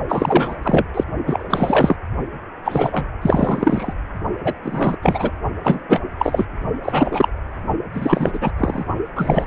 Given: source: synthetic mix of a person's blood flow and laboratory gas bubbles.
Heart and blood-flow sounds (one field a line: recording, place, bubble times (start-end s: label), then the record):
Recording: Doppler ultrasound of blood flow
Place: precordium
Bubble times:
0.08-0.57 s: bubbles
0.62-0.85 s: bubbles
0.94-1.04 s: bubbles
1.26-1.96 s: bubbles
2.65-3.07 s: bubbles
3.21-3.93 s: bubbles
4.43-4.54 s: bubbles
4.62-4.96 s: bubbles
5.02-5.31 s: bubbles
5.64-5.80 s: bubbles
5.88-6.00 s: bubbles
6.18-6.45 s: bubbles
6.83-7.28 s: bubbles
7.94-8.52 s: bubbles
8.58-8.85 s: bubbles
9.16-9.46 s: bubbles
From the record:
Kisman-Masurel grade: 343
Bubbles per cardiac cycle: rolling drumbeat, 9 or more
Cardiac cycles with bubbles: 100%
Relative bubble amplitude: loud (0.450 to 0.775)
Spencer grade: 3 (all of the cardiac periods contain showers or single bubble signals, but not dominating or overriding the cardiac motion signals)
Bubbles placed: only in the low amplitude regions of the cardiac cycle